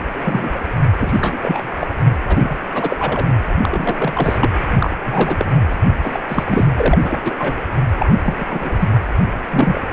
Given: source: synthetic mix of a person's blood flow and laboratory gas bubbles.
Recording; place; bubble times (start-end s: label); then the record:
Doppler ultrasound of blood flow; precordium
0.13-0.59 s: bubbles
0.98-1.38 s: bubbles
1.42-1.78 s: bubbles
1.80-1.87 s: bubbles
2.27-2.57 s: bubbles
2.74-3.26 s: bubbles
3.29-3.34 s: bubbles
3.63-4.38 s: bubbles
4.41-4.50 s: bubbles
4.79-4.90 s: bubbles
5.06-5.45 s: bubbles
5.70-5.76 s: bubbles
6.03-6.21 s: bubbles
6.28-6.66 s: bubbles
6.77-6.98 s: bubbles
7.03-7.20 s: bubbles
7.25-7.34 s: bubbles
7.38-7.66 s: bubbles
7.99-8.18 s: bubbles
8.22-8.46 s: bubbles
8.49-8.88 s: bubbles
9.50-9.79 s: bubbles
From the record:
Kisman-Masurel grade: 242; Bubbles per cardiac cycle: several, 3 to 8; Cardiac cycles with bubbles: 100%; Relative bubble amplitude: moderate (0.250 to 0.450); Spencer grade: 3 (all of the cardiac periods contain showers or single bubble signals, but not dominating or overriding the cardiac motion signals); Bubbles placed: anywhere in the cardiac cycle